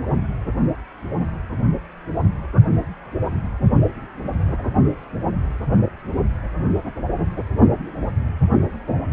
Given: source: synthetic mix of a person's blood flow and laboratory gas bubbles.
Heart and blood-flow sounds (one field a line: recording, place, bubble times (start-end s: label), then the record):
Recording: Doppler ultrasound of blood flow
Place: precordium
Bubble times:
5.86-5.90 s: bubbles
From the record:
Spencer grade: 2 (many but less than half of the cardiac periods contain bubble signals, singularly or in groups)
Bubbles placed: anywhere in the cardiac cycle